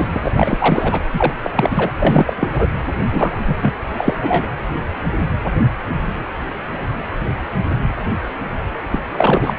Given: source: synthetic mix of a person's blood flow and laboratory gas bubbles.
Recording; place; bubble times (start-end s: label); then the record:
Doppler ultrasound of blood flow; precordium
0.00-0.07 s: bubbles
0.14-0.21 s: bubbles
0.25-0.32 s: bubbles
0.35-1.03 s: bubbles
1.13-1.33 s: bubbles
1.43-1.50 s: bubbles
1.56-1.91 s: bubbles
1.99-2.67 s: bubbles
3.12-3.31 s: bubbles
3.47-3.55 s: bubbles
3.62-3.74 s: bubbles
3.96-4.46 s: bubbles
8.90-8.99 s: bubbles
9.14-9.54 s: bubbles
From the record:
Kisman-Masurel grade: 333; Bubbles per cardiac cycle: rolling drumbeat, 9 or more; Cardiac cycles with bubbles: 50 to 99%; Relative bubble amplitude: loud (0.450 to 0.775); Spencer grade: 3 (all of the cardiac periods contain showers or single bubble signals, but not dominating or overriding the cardiac motion signals); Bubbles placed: anywhere in the cardiac cycle